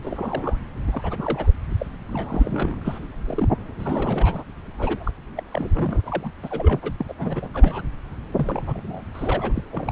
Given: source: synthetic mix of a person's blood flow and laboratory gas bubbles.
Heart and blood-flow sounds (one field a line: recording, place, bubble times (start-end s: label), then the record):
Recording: Doppler ultrasound of blood flow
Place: subclavian vein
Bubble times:
0.00-0.58 s: bubbles
0.87-1.53 s: bubbles
1.78-1.86 s: bubbles
2.09-2.98 s: bubbles
3.25-3.48 s: bubbles
3.79-4.43 s: bubbles
4.78-5.12 s: bubbles
5.36-6.31 s: bubbles
6.42-6.92 s: bubbles
7.00-7.05 s: bubbles
7.08-7.14 s: bubbles
7.17-7.49 s: bubbles
7.54-7.82 s: bubbles
8.37-8.62 s: bubbles
8.67-9.02 s: bubbles
9.13-9.53 s: bubbles
9.55-9.63 s: bubbles
9.73-9.92 s: bubbles
From the record:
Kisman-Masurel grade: 342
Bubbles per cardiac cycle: rolling drumbeat, 9 or more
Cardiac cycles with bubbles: 100%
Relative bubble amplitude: moderate (0.250 to 0.450)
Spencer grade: 3 (all of the cardiac periods contain showers or single bubble signals, but not dominating or overriding the cardiac motion signals)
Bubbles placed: anywhere in the cardiac cycle